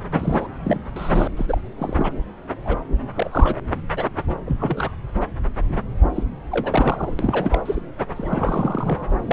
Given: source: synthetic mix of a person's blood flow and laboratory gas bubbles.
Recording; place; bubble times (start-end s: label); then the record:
Doppler ultrasound of blood flow; subclavian vein
0.12-0.46 s: bubbles
0.63-0.79 s: bubbles
0.91-1.27 s: bubbles
1.37-1.61 s: bubbles
1.78-2.12 s: bubbles
2.65-2.79 s: bubbles
3.15-3.28 s: bubbles
3.31-3.56 s: bubbles
3.96-4.04 s: bubbles
4.46-4.57 s: bubbles
4.59-4.91 s: bubbles
5.67-5.80 s: bubbles
6.14-6.23 s: bubbles
6.51-7.14 s: bubbles
7.19-7.59 s: bubbles
7.66-7.82 s: bubbles
8.16-9.07 s: bubbles
9.25-9.33 s: bubbles
From the record:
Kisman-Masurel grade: 232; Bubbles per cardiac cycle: several, 3 to 8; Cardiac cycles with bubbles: 50 to 99%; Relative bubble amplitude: moderate (0.250 to 0.450); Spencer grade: 3 (all of the cardiac periods contain showers or single bubble signals, but not dominating or overriding the cardiac motion signals); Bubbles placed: anywhere in the cardiac cycle